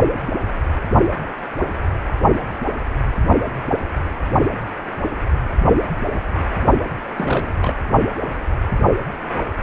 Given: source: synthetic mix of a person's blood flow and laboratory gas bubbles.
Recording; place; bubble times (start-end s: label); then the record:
Doppler ultrasound of blood flow; precordium
7.16-7.80 s: bubbles
From the record:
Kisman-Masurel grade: 212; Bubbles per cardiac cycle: several, 3 to 8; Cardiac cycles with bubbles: 1 to 10%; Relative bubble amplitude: moderate (0.250 to 0.450); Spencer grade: 1 (occasional bubble signal discernible with the cardiac motion signal, with majority of cardiac periods free of bubbles); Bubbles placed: only in the low amplitude regions of the cardiac cycle